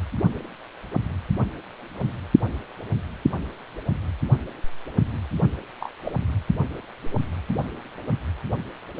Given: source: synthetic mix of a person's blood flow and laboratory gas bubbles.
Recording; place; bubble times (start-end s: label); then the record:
Doppler ultrasound of blood flow; precordium
5.80-5.91 s: bubbles
6.04-6.12 s: bubbles
From the record:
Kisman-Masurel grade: 111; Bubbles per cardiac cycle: 1 to 2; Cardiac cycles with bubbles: 1 to 10%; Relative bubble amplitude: barely perceptible (0.100 to 0.250); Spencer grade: 1 (occasional bubble signal discernible with the cardiac motion signal, with majority of cardiac periods free of bubbles); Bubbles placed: anywhere in the cardiac cycle